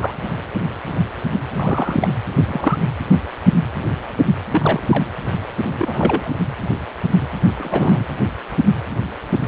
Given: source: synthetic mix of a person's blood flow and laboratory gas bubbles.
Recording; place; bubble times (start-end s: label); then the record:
Doppler ultrasound of blood flow; precordium
0.00-0.17 s: bubbles
1.50-2.16 s: bubbles
2.47-2.78 s: bubbles
4.50-5.06 s: bubbles
5.72-6.34 s: bubbles
7.58-8.05 s: bubbles
From the record:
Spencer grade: 2 (many but less than half of the cardiac periods contain bubble signals, singularly or in groups); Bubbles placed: anywhere in the cardiac cycle